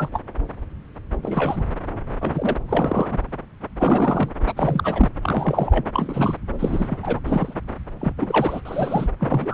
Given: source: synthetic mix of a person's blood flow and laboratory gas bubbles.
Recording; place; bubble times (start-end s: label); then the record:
Doppler ultrasound of blood flow; subclavian vein
0.00-0.08 s: bubbles
0.11-0.20 s: bubbles
1.22-1.63 s: bubbles
2.21-2.56 s: bubbles
2.69-3.18 s: bubbles
3.79-4.33 s: bubbles
4.46-4.54 s: bubbles
4.56-5.09 s: bubbles
5.23-5.88 s: bubbles
5.93-6.37 s: bubbles
6.58-6.98 s: bubbles
7.03-7.20 s: bubbles
7.25-7.54 s: bubbles
8.00-8.12 s: bubbles
8.16-8.61 s: bubbles
8.65-9.07 s: bubbles
9.19-9.53 s: bubbles
From the record:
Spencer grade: 3 (all of the cardiac periods contain showers or single bubble signals, but not dominating or overriding the cardiac motion signals); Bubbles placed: anywhere in the cardiac cycle